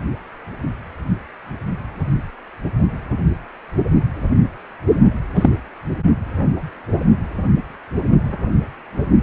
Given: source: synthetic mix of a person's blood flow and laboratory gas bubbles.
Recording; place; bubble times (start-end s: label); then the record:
Doppler ultrasound of blood flow; precordium
5.35-5.50 s: bubbles
From the record:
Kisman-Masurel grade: 113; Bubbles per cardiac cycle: 1 to 2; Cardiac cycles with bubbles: 1 to 10%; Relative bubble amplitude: loud (0.450 to 0.775); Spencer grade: 1 (occasional bubble signal discernible with the cardiac motion signal, with majority of cardiac periods free of bubbles); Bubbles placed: anywhere in the cardiac cycle